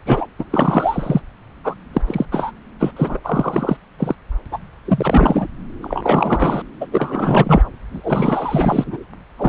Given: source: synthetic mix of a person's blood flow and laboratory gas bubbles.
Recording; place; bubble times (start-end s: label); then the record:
Doppler ultrasound of blood flow; subclavian vein
0.05-0.26 s: bubbles
0.39-0.45 s: bubbles
0.50-1.20 s: bubbles
1.64-1.74 s: bubbles
1.93-2.02 s: bubbles
2.07-2.26 s: bubbles
2.31-2.52 s: bubbles
2.80-2.91 s: bubbles
2.97-3.18 s: bubbles
3.24-3.77 s: bubbles
3.99-4.15 s: bubbles
4.51-4.58 s: bubbles
4.85-5.46 s: bubbles
5.82-6.62 s: bubbles
6.81-6.87 s: bubbles
6.92-7.62 s: bubbles
7.91-8.97 s: bubbles
9.38-9.49 s: bubbles
From the record:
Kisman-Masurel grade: 343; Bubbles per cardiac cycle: rolling drumbeat, 9 or more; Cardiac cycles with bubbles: 100%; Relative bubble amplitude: loud (0.450 to 0.775); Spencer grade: 3 (all of the cardiac periods contain showers or single bubble signals, but not dominating or overriding the cardiac motion signals); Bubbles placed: anywhere in the cardiac cycle